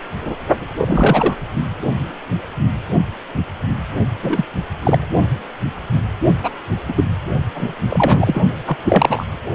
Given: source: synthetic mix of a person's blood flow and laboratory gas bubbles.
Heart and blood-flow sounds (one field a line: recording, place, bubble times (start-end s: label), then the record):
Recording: Doppler ultrasound of blood flow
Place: precordium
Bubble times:
0.78-1.35 s: bubbles
4.22-4.53 s: bubbles
4.84-4.98 s: bubbles
6.43-6.50 s: bubbles
6.88-7.04 s: bubbles
7.54-7.73 s: bubbles
7.89-8.40 s: bubbles
8.66-8.77 s: bubbles
8.84-9.26 s: bubbles
From the record:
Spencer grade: 2 (many but less than half of the cardiac periods contain bubble signals, singularly or in groups)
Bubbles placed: only in the low amplitude regions of the cardiac cycle